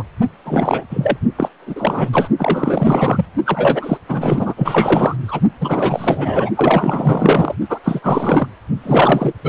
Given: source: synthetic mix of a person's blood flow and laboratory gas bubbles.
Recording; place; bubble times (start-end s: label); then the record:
Doppler ultrasound of blood flow; precordium
0.00-0.03 s: bubbles
0.45-0.83 s: bubbles
0.90-1.17 s: bubbles
1.38-1.49 s: bubbles
1.67-2.29 s: bubbles
2.38-3.25 s: bubbles
3.45-3.97 s: bubbles
4.08-4.54 s: bubbles
4.57-5.17 s: bubbles
5.28-5.40 s: bubbles
5.60-6.50 s: bubbles
6.56-7.55 s: bubbles
7.69-7.79 s: bubbles
7.84-8.00 s: bubbles
8.03-8.47 s: bubbles
8.84-9.32 s: bubbles
9.43-9.49 s: bubbles
From the record:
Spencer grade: 4 (maximum detectable bubble signal sounding continuously throughout systole and diastole of every cardiac period, and overriding the amplitude of the normal cardiac signals); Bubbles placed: only in the low amplitude regions of the cardiac cycle